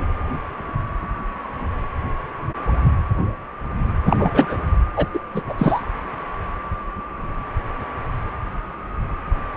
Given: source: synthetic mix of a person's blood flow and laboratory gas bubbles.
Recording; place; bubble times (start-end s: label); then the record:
Doppler ultrasound of blood flow; precordium
0.00-0.06 s: bubbles
4.05-4.17 s: bubbles
4.19-4.57 s: bubbles
4.96-5.07 s: bubbles
5.13-5.19 s: bubbles
5.34-5.42 s: bubbles
5.48-5.54 s: bubbles
5.58-5.82 s: bubbles
From the record:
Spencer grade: 2 (many but less than half of the cardiac periods contain bubble signals, singularly or in groups); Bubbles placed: anywhere in the cardiac cycle